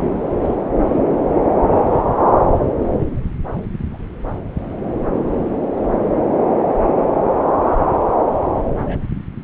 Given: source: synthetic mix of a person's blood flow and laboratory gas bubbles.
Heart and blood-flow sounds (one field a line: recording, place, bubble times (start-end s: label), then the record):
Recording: Doppler ultrasound of blood flow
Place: subclavian vein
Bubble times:
3.93-3.96 s: bubbles
8.85-9.04 s: bubbles
From the record:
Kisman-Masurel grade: 121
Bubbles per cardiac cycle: 1 to 2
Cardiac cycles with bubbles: 10 to 50%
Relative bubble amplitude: barely perceptible (0.100 to 0.250)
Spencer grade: 2 (many but less than half of the cardiac periods contain bubble signals, singularly or in groups)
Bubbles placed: anywhere in the cardiac cycle